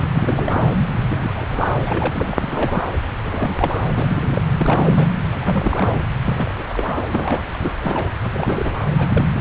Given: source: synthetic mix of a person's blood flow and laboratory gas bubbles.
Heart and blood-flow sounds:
Doppler ultrasound of blood flow; subclavian vein
0.00-0.06 s: bubbles
0.14-0.74 s: bubbles
1.08-1.31 s: bubbles
1.35-1.45 s: bubbles
1.50-1.74 s: bubbles
1.85-2.90 s: bubbles
3.24-3.88 s: bubbles
3.98-4.42 s: bubbles
4.59-5.06 s: bubbles
5.31-5.97 s: bubbles
6.25-6.52 s: bubbles
6.57-6.63 s: bubbles
6.66-7.07 s: bubbles
7.11-7.44 s: bubbles
7.53-7.57 s: bubbles
7.60-7.73 s: bubbles
7.80-8.11 s: bubbles
8.22-8.75 s: bubbles
8.97-9.28 s: bubbles
9.30-9.41 s: bubbles
From the record:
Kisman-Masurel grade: 342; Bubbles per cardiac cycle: rolling drumbeat, 9 or more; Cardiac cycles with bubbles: 100%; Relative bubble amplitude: moderate (0.250 to 0.450); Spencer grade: 3 (all of the cardiac periods contain showers or single bubble signals, but not dominating or overriding the cardiac motion signals); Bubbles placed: anywhere in the cardiac cycle

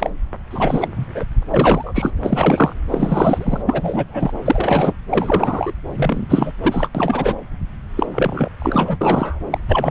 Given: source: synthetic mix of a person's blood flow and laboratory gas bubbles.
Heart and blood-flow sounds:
Doppler ultrasound of blood flow; subclavian vein
0.00-0.10 s: bubbles
0.51-0.88 s: bubbles
0.96-1.24 s: bubbles
1.50-2.11 s: bubbles
2.21-2.75 s: bubbles
2.89-3.62 s: bubbles
3.66-4.31 s: bubbles
4.45-4.93 s: bubbles
5.09-5.72 s: bubbles
5.95-6.51 s: bubbles
6.63-6.89 s: bubbles
6.95-7.36 s: bubbles
7.96-8.06 s: bubbles
8.12-8.49 s: bubbles
8.58-8.98 s: bubbles
9.01-9.39 s: bubbles
9.51-9.58 s: bubbles
9.69-9.91 s: bubbles
From the record:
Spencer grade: 3 (all of the cardiac periods contain showers or single bubble signals, but not dominating or overriding the cardiac motion signals); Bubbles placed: anywhere in the cardiac cycle

